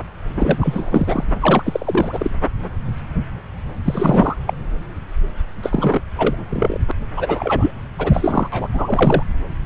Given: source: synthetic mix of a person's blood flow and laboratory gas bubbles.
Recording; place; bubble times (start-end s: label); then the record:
Doppler ultrasound of blood flow; subclavian vein
0.36-1.24 s: bubbles
1.40-2.30 s: bubbles
3.85-4.36 s: bubbles
4.46-4.53 s: bubbles
5.62-6.00 s: bubbles
6.18-6.36 s: bubbles
6.50-6.78 s: bubbles
6.88-6.92 s: bubbles
7.17-7.71 s: bubbles
7.98-8.49 s: bubbles
8.52-8.68 s: bubbles
8.73-9.23 s: bubbles
From the record:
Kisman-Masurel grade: 333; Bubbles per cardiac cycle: rolling drumbeat, 9 or more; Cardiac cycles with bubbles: 50 to 99%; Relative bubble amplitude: loud (0.450 to 0.775); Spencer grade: 3 (all of the cardiac periods contain showers or single bubble signals, but not dominating or overriding the cardiac motion signals); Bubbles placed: anywhere in the cardiac cycle